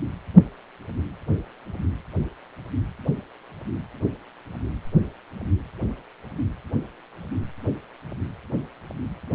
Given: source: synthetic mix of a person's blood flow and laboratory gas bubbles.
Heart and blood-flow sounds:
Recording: Doppler ultrasound of blood flow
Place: precordium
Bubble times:
no bubbles
From the record:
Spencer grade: 0 (complete lack of bubble signals)

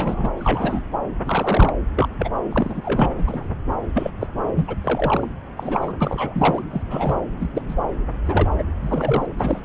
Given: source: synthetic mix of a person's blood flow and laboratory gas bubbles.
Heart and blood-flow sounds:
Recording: Doppler ultrasound of blood flow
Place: subclavian vein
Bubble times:
0.00-0.30 s: bubbles
0.38-0.82 s: bubbles
1.26-1.74 s: bubbles
1.97-2.09 s: bubbles
2.18-2.30 s: bubbles
2.50-3.15 s: bubbles
3.18-3.23 s: bubbles
3.27-3.49 s: bubbles
3.94-4.11 s: bubbles
4.20-4.27 s: bubbles
4.55-4.75 s: bubbles
4.83-5.28 s: bubbles
5.57-5.93 s: bubbles
6.00-6.62 s: bubbles
6.70-6.82 s: bubbles
6.90-7.15 s: bubbles
7.40-7.49 s: bubbles
7.54-7.62 s: bubbles
7.68-7.75 s: bubbles
8.25-8.49 s: bubbles
8.58-8.63 s: bubbles
8.81-9.26 s: bubbles
9.38-9.63 s: bubbles
From the record:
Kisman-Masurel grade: 242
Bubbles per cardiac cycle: several, 3 to 8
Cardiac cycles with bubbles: 100%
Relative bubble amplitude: moderate (0.250 to 0.450)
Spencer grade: 3 (all of the cardiac periods contain showers or single bubble signals, but not dominating or overriding the cardiac motion signals)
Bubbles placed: anywhere in the cardiac cycle

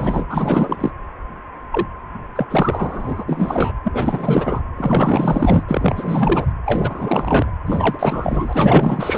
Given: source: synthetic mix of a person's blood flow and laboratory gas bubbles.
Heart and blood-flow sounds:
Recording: Doppler ultrasound of blood flow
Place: precordium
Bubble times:
0.00-0.26 s: bubbles
0.29-0.91 s: bubbles
1.72-1.87 s: bubbles
2.35-2.47 s: bubbles
2.50-3.25 s: bubbles
3.28-3.73 s: bubbles
3.85-4.62 s: bubbles
4.76-5.63 s: bubbles
5.67-6.52 s: bubbles
6.65-7.52 s: bubbles
7.66-9.18 s: bubbles
From the record:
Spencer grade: 4 (maximum detectable bubble signal sounding continuously throughout systole and diastole of every cardiac period, and overriding the amplitude of the normal cardiac signals)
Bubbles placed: anywhere in the cardiac cycle

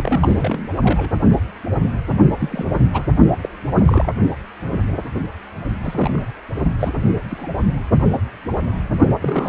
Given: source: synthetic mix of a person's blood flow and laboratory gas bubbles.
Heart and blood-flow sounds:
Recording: Doppler ultrasound of blood flow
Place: precordium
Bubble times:
0.00-0.69 s: bubbles
0.82-1.10 s: bubbles
2.39-2.72 s: bubbles
2.93-3.03 s: bubbles
3.42-3.49 s: bubbles
3.73-4.13 s: bubbles
5.83-6.22 s: bubbles
6.79-6.93 s: bubbles
7.30-7.47 s: bubbles
9.21-9.49 s: bubbles
From the record:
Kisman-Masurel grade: 232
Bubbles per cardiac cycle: several, 3 to 8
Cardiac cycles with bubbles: 50 to 99%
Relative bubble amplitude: moderate (0.250 to 0.450)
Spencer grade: 3 (all of the cardiac periods contain showers or single bubble signals, but not dominating or overriding the cardiac motion signals)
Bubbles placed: only in the low amplitude regions of the cardiac cycle

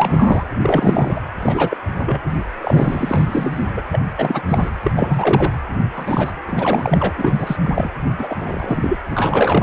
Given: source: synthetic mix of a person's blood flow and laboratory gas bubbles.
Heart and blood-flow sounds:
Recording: Doppler ultrasound of blood flow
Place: precordium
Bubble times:
0.00-0.44 s: bubbles
0.61-1.21 s: bubbles
1.42-1.77 s: bubbles
1.99-2.21 s: bubbles
2.62-3.66 s: bubbles
3.77-3.82 s: bubbles
3.92-4.00 s: bubbles
4.18-4.42 s: bubbles
4.48-4.69 s: bubbles
4.82-4.91 s: bubbles
4.96-5.53 s: bubbles
5.96-6.31 s: bubbles
6.46-7.13 s: bubbles
7.17-7.56 s: bubbles
7.62-7.89 s: bubbles
8.19-8.98 s: bubbles
9.11-9.63 s: bubbles
From the record:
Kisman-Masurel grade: 343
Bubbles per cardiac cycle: rolling drumbeat, 9 or more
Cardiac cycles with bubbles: 100%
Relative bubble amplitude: loud (0.450 to 0.775)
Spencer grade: 3 (all of the cardiac periods contain showers or single bubble signals, but not dominating or overriding the cardiac motion signals)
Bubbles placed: anywhere in the cardiac cycle

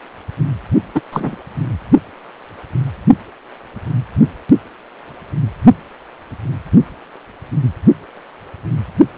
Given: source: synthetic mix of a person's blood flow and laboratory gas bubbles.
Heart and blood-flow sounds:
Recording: Doppler ultrasound of blood flow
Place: precordium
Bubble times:
0.94-1.01 s: bubbles
1.12-1.37 s: bubbles
From the record:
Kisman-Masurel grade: 213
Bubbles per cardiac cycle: several, 3 to 8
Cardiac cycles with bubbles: 1 to 10%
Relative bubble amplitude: loud (0.450 to 0.775)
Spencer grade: 1 (occasional bubble signal discernible with the cardiac motion signal, with majority of cardiac periods free of bubbles)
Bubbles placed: only in the low amplitude regions of the cardiac cycle

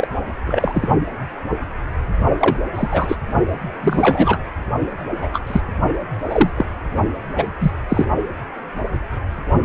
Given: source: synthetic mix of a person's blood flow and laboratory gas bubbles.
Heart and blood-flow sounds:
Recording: Doppler ultrasound of blood flow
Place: precordium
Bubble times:
0.00-0.07 s: bubbles
0.46-0.89 s: bubbles
2.40-2.56 s: bubbles
2.74-3.17 s: bubbles
3.81-4.38 s: bubbles
5.21-5.29 s: bubbles
5.33-5.42 s: bubbles
5.46-5.61 s: bubbles
6.29-6.50 s: bubbles
6.56-6.65 s: bubbles
7.38-7.50 s: bubbles
7.60-7.75 s: bubbles
7.88-8.07 s: bubbles
From the record:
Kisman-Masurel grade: 233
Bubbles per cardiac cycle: several, 3 to 8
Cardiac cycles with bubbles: 50 to 99%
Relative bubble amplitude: loud (0.450 to 0.775)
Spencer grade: 3 (all of the cardiac periods contain showers or single bubble signals, but not dominating or overriding the cardiac motion signals)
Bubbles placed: only in the low amplitude regions of the cardiac cycle

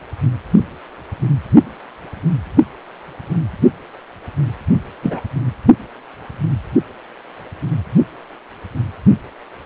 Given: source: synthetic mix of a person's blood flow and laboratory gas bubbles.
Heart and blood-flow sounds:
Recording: Doppler ultrasound of blood flow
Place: precordium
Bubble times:
5.02-5.21 s: bubbles
From the record:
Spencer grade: 1 (occasional bubble signal discernible with the cardiac motion signal, with majority of cardiac periods free of bubbles)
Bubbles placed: anywhere in the cardiac cycle

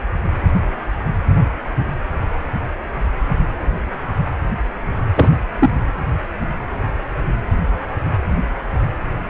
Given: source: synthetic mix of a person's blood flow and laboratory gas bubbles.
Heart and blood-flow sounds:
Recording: Doppler ultrasound of blood flow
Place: precordium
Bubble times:
5.15-5.29 s: bubbles
5.58-5.71 s: bubbles
From the record:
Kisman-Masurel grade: 213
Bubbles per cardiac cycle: several, 3 to 8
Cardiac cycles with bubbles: 1 to 10%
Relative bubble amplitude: loud (0.450 to 0.775)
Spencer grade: 1 (occasional bubble signal discernible with the cardiac motion signal, with majority of cardiac periods free of bubbles)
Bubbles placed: anywhere in the cardiac cycle

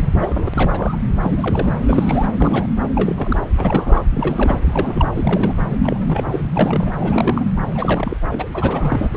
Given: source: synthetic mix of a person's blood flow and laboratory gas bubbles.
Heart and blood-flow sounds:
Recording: Doppler ultrasound of blood flow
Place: subclavian vein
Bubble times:
0.00-0.15 s: bubbles
0.19-0.96 s: bubbles
1.22-1.73 s: bubbles
1.86-2.27 s: bubbles
2.38-2.67 s: bubbles
2.95-3.42 s: bubbles
3.55-4.06 s: bubbles
4.10-4.59 s: bubbles
4.62-5.61 s: bubbles
5.83-6.51 s: bubbles
6.56-6.91 s: bubbles
6.99-7.45 s: bubbles
7.75-8.17 s: bubbles
8.31-9.09 s: bubbles
9.13-9.17 s: bubbles
From the record:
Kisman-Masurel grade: 342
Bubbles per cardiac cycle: rolling drumbeat, 9 or more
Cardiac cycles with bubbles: 100%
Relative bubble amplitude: moderate (0.250 to 0.450)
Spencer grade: 3 (all of the cardiac periods contain showers or single bubble signals, but not dominating or overriding the cardiac motion signals)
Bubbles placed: anywhere in the cardiac cycle

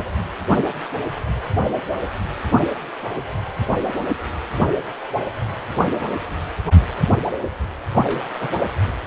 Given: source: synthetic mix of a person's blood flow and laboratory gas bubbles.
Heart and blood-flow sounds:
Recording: Doppler ultrasound of blood flow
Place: precordium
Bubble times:
8.04-8.29 s: bubbles
8.40-8.48 s: bubbles
From the record:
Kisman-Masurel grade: 111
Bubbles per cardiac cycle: 1 to 2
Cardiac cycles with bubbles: 1 to 10%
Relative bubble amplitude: barely perceptible (0.100 to 0.250)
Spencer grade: 1 (occasional bubble signal discernible with the cardiac motion signal, with majority of cardiac periods free of bubbles)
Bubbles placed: only in the low amplitude regions of the cardiac cycle

